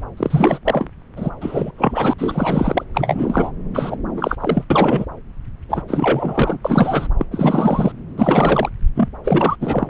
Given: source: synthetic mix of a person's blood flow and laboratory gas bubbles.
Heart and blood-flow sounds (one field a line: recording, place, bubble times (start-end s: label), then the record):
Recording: Doppler ultrasound of blood flow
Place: subclavian vein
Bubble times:
0.17-0.58 s: bubbles
0.65-0.89 s: bubbles
1.16-1.30 s: bubbles
1.41-1.72 s: bubbles
1.77-2.14 s: bubbles
2.18-2.84 s: bubbles
2.94-3.52 s: bubbles
3.74-3.96 s: bubbles
4.16-4.36 s: bubbles
4.40-4.64 s: bubbles
4.70-5.05 s: bubbles
5.69-5.82 s: bubbles
5.88-6.58 s: bubbles
6.65-7.07 s: bubbles
7.18-7.26 s: bubbles
7.31-7.92 s: bubbles
8.18-8.70 s: bubbles
8.95-9.09 s: bubbles
9.24-9.56 s: bubbles
9.61-9.89 s: bubbles
From the record:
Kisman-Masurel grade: 343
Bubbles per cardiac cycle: rolling drumbeat, 9 or more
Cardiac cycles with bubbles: 100%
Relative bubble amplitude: loud (0.450 to 0.775)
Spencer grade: 3 (all of the cardiac periods contain showers or single bubble signals, but not dominating or overriding the cardiac motion signals)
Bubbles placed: anywhere in the cardiac cycle